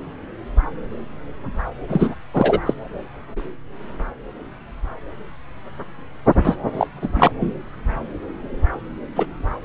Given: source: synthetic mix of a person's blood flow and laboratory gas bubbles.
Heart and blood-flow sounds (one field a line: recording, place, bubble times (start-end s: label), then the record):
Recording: Doppler ultrasound of blood flow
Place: subclavian vein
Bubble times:
1.88-2.15 s: bubbles
2.33-2.60 s: bubbles
2.66-2.74 s: bubbles
6.44-6.57 s: bubbles
6.74-6.87 s: bubbles
7.00-7.31 s: bubbles
7.40-7.54 s: bubbles
9.15-9.25 s: bubbles
From the record:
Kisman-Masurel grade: 223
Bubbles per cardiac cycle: several, 3 to 8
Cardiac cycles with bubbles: 10 to 50%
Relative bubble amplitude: loud (0.450 to 0.775)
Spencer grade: 2 (many but less than half of the cardiac periods contain bubble signals, singularly or in groups)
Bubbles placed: anywhere in the cardiac cycle